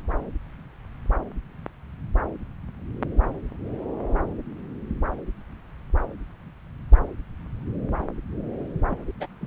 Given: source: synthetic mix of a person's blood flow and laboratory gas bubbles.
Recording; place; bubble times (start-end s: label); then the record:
Doppler ultrasound of blood flow; subclavian vein
8.87-8.97 s: bubbles
9.08-9.12 s: bubbles
9.20-9.27 s: bubbles
9.41-9.47 s: bubbles
From the record:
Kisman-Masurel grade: 211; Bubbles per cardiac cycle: several, 3 to 8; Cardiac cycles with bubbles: 1 to 10%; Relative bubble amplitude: barely perceptible (0.100 to 0.250); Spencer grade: 1 (occasional bubble signal discernible with the cardiac motion signal, with majority of cardiac periods free of bubbles); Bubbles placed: anywhere in the cardiac cycle